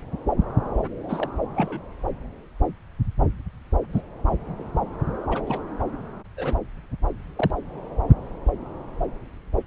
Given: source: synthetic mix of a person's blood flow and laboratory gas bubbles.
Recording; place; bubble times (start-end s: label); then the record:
Doppler ultrasound of blood flow; subclavian vein
1.08-1.30 s: bubbles
1.55-1.80 s: bubbles
3.94-4.02 s: bubbles
4.59-4.63 s: bubbles
5.30-5.42 s: bubbles
5.46-5.61 s: bubbles
6.37-6.59 s: bubbles
7.36-7.50 s: bubbles
From the record:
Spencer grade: 2 (many but less than half of the cardiac periods contain bubble signals, singularly or in groups); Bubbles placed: anywhere in the cardiac cycle